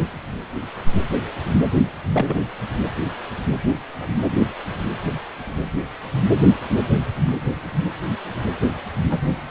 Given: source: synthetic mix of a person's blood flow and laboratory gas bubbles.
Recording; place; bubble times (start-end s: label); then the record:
Doppler ultrasound of blood flow; precordium
2.12-2.39 s: bubbles
9.10-9.20 s: bubbles
From the record:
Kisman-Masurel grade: 122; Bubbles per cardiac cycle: 1 to 2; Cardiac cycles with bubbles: 10 to 50%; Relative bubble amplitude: moderate (0.250 to 0.450); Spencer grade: 2 (many but less than half of the cardiac periods contain bubble signals, singularly or in groups); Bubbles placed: anywhere in the cardiac cycle